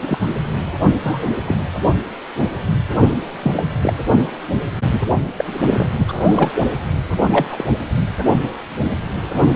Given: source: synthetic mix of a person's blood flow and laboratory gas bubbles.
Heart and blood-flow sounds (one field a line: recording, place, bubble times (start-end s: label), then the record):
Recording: Doppler ultrasound of blood flow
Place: precordium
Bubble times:
0.02-0.18 s: bubbles
1.02-1.28 s: bubbles
1.45-1.55 s: bubbles
3.42-3.63 s: bubbles
3.82-3.93 s: bubbles
4.91-5.11 s: bubbles
5.37-5.45 s: bubbles
5.48-5.53 s: bubbles
5.65-5.88 s: bubbles
5.98-6.75 s: bubbles
7.30-7.65 s: bubbles
9.34-9.52 s: bubbles
From the record:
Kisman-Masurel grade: 232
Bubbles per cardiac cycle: several, 3 to 8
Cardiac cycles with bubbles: 50 to 99%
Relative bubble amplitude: moderate (0.250 to 0.450)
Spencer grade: 3 (all of the cardiac periods contain showers or single bubble signals, but not dominating or overriding the cardiac motion signals)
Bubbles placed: anywhere in the cardiac cycle